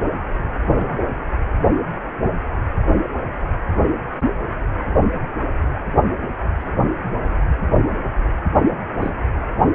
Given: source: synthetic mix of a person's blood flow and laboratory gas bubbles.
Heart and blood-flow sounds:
Doppler ultrasound of blood flow; precordium
0.74-0.98 s: bubbles
9.02-9.11 s: bubbles
From the record:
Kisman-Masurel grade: 121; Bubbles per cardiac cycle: 1 to 2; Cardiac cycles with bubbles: 10 to 50%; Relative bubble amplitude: barely perceptible (0.100 to 0.250); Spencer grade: 2 (many but less than half of the cardiac periods contain bubble signals, singularly or in groups); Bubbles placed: anywhere in the cardiac cycle

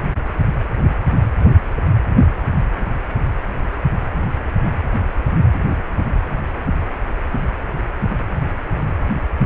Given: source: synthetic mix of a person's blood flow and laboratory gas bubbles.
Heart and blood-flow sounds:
Doppler ultrasound of blood flow; precordium
no bubbles
From the record:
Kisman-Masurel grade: 000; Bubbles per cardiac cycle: 0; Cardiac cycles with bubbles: 0%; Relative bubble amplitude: no bubbles discernible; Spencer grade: 0 (complete lack of bubble signals)

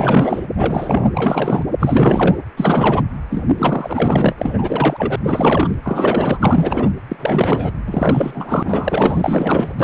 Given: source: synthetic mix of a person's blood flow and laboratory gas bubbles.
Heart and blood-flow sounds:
Doppler ultrasound of blood flow; precordium
0.00-0.46 s: bubbles
0.56-1.10 s: bubbles
1.15-1.67 s: bubbles
1.79-2.38 s: bubbles
2.56-3.02 s: bubbles
3.31-3.44 s: bubbles
3.57-4.35 s: bubbles
4.38-5.16 s: bubbles
5.24-5.75 s: bubbles
5.83-6.39 s: bubbles
6.42-6.92 s: bubbles
7.08-7.70 s: bubbles
7.86-9.74 s: bubbles
9.78-9.84 s: bubbles
From the record:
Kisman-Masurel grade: 444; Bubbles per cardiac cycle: continuous sound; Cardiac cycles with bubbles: 100%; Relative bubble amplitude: maximal (0.775 to 0.999); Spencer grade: 4 (maximum detectable bubble signal sounding continuously throughout systole and diastole of every cardiac period, and overriding the amplitude of the normal cardiac signals); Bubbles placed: anywhere in the cardiac cycle

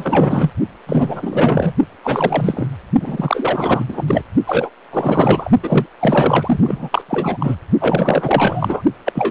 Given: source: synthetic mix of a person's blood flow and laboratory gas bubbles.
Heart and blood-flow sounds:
Doppler ultrasound of blood flow; precordium
0.00-0.51 s: bubbles
0.86-1.74 s: bubbles
2.04-2.67 s: bubbles
3.00-4.04 s: bubbles
4.06-4.23 s: bubbles
4.46-4.70 s: bubbles
4.92-5.51 s: bubbles
5.62-5.86 s: bubbles
5.99-6.89 s: bubbles
6.92-7.01 s: bubbles
7.08-7.56 s: bubbles
7.80-8.82 s: bubbles
9.05-9.31 s: bubbles
From the record:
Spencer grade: 4 (maximum detectable bubble signal sounding continuously throughout systole and diastole of every cardiac period, and overriding the amplitude of the normal cardiac signals); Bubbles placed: only in the low amplitude regions of the cardiac cycle

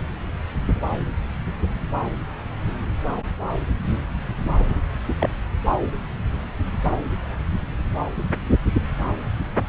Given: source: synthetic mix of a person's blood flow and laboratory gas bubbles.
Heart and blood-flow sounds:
Doppler ultrasound of blood flow; subclavian vein
5.20-5.29 s: bubbles
From the record:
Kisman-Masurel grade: 112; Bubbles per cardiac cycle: 1 to 2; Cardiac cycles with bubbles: 1 to 10%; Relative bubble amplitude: moderate (0.250 to 0.450); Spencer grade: 1 (occasional bubble signal discernible with the cardiac motion signal, with majority of cardiac periods free of bubbles); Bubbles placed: anywhere in the cardiac cycle

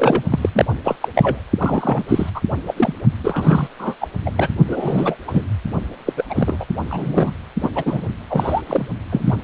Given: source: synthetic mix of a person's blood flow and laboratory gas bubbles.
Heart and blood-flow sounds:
Doppler ultrasound of blood flow; precordium
0.00-0.23 s: bubbles
0.30-0.49 s: bubbles
0.55-0.65 s: bubbles
0.84-0.95 s: bubbles
1.00-1.08 s: bubbles
1.15-1.44 s: bubbles
1.57-2.04 s: bubbles
2.08-2.30 s: bubbles
2.34-2.41 s: bubbles
2.68-2.74 s: bubbles
2.77-2.93 s: bubbles
3.23-3.68 s: bubbles
3.79-3.94 s: bubbles
4.00-4.07 s: bubbles
4.25-4.30 s: bubbles
4.35-4.49 s: bubbles
4.67-5.16 s: bubbles
5.27-5.46 s: bubbles
6.05-6.13 s: bubbles
6.17-6.25 s: bubbles
6.29-6.65 s: bubbles
6.90-7.30 s: bubbles
7.62-7.69 s: bubbles
7.75-8.08 s: bubbles
8.29-8.62 s: bubbles
8.67-8.88 s: bubbles
9.11-9.36 s: bubbles
From the record:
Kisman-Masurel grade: 333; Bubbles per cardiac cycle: rolling drumbeat, 9 or more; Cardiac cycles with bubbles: 50 to 99%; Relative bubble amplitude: loud (0.450 to 0.775); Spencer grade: 3 (all of the cardiac periods contain showers or single bubble signals, but not dominating or overriding the cardiac motion signals); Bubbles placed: only in the low amplitude regions of the cardiac cycle

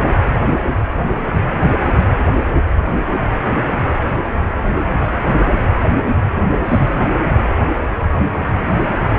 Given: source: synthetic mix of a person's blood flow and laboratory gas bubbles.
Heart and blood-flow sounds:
Doppler ultrasound of blood flow; precordium
6.67-6.86 s: bubbles
From the record:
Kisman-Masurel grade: 213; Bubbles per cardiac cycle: several, 3 to 8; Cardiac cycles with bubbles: 1 to 10%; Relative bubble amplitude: loud (0.450 to 0.775); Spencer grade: 1 (occasional bubble signal discernible with the cardiac motion signal, with majority of cardiac periods free of bubbles); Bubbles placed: anywhere in the cardiac cycle

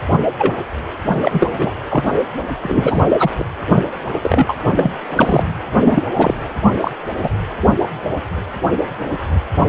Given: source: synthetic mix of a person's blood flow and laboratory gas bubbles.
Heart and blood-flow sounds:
Doppler ultrasound of blood flow; precordium
0.11-0.18 s: bubbles
0.38-0.55 s: bubbles
1.23-1.48 s: bubbles
1.57-1.71 s: bubbles
1.90-2.04 s: bubbles
2.06-2.19 s: bubbles
2.62-3.04 s: bubbles
3.19-3.29 s: bubbles
3.38-3.45 s: bubbles
4.23-4.54 s: bubbles
4.73-4.96 s: bubbles
5.10-5.43 s: bubbles
5.84-6.02 s: bubbles
6.13-6.33 s: bubbles
6.80-6.91 s: bubbles
7.22-7.30 s: bubbles
From the record:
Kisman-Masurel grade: 233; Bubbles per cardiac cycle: several, 3 to 8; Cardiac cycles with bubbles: 50 to 99%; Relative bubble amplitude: loud (0.450 to 0.775); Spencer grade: 3 (all of the cardiac periods contain showers or single bubble signals, but not dominating or overriding the cardiac motion signals); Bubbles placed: anywhere in the cardiac cycle

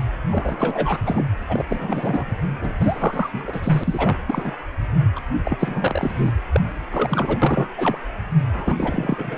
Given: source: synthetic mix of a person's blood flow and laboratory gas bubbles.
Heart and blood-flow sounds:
Doppler ultrasound of blood flow; precordium
0.30-0.99 s: bubbles
1.05-1.29 s: bubbles
1.48-1.65 s: bubbles
1.69-2.37 s: bubbles
2.61-2.72 s: bubbles
2.79-3.30 s: bubbles
3.33-4.17 s: bubbles
4.28-4.56 s: bubbles
5.16-5.20 s: bubbles
5.44-6.32 s: bubbles
6.52-6.61 s: bubbles
6.91-7.38 s: bubbles
7.42-7.68 s: bubbles
7.76-7.98 s: bubbles
8.53-9.38 s: bubbles
From the record:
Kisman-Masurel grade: 342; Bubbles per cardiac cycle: rolling drumbeat, 9 or more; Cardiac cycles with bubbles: 100%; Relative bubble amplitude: moderate (0.250 to 0.450); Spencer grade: 3 (all of the cardiac periods contain showers or single bubble signals, but not dominating or overriding the cardiac motion signals); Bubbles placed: anywhere in the cardiac cycle

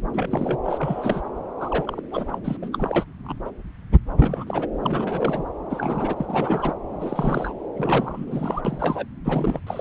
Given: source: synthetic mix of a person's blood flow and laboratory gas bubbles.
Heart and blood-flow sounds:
Doppler ultrasound of blood flow; subclavian vein
0.13-0.58 s: bubbles
0.64-1.21 s: bubbles
1.59-2.01 s: bubbles
2.10-2.39 s: bubbles
2.44-2.57 s: bubbles
2.62-2.69 s: bubbles
2.72-3.05 s: bubbles
3.24-3.35 s: bubbles
3.45-3.50 s: bubbles
4.16-4.67 s: bubbles
4.83-5.43 s: bubbles
5.70-6.13 s: bubbles
6.17-6.26 s: bubbles
6.29-6.73 s: bubbles
6.90-7.54 s: bubbles
7.76-8.62 s: bubbles
8.64-9.05 s: bubbles
9.24-9.59 s: bubbles
9.66-9.81 s: bubbles
From the record:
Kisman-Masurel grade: 332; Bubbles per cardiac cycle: rolling drumbeat, 9 or more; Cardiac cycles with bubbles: 50 to 99%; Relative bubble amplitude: moderate (0.250 to 0.450); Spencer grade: 3 (all of the cardiac periods contain showers or single bubble signals, but not dominating or overriding the cardiac motion signals); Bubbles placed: anywhere in the cardiac cycle

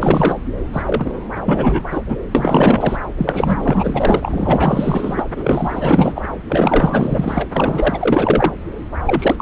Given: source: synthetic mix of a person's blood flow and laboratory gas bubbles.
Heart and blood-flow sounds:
Doppler ultrasound of blood flow; subclavian vein
0.00-0.38 s: bubbles
0.72-1.11 s: bubbles
1.45-1.83 s: bubbles
1.91-2.02 s: bubbles
2.06-2.17 s: bubbles
2.34-2.98 s: bubbles
3.17-5.25 s: bubbles
5.36-6.22 s: bubbles
6.49-8.53 s: bubbles
9.05-9.42 s: bubbles
From the record:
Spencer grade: 4 (maximum detectable bubble signal sounding continuously throughout systole and diastole of every cardiac period, and overriding the amplitude of the normal cardiac signals); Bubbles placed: anywhere in the cardiac cycle

